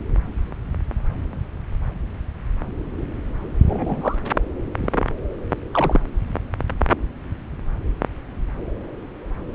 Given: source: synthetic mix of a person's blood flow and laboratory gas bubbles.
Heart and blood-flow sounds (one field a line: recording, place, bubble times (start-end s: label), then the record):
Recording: Doppler ultrasound of blood flow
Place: subclavian vein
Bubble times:
3.66-4.15 s: bubbles
4.77-5.05 s: bubbles
5.71-6.00 s: bubbles
From the record:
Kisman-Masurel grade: 122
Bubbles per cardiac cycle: 1 to 2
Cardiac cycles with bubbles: 10 to 50%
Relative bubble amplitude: moderate (0.250 to 0.450)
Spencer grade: 2 (many but less than half of the cardiac periods contain bubble signals, singularly or in groups)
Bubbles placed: anywhere in the cardiac cycle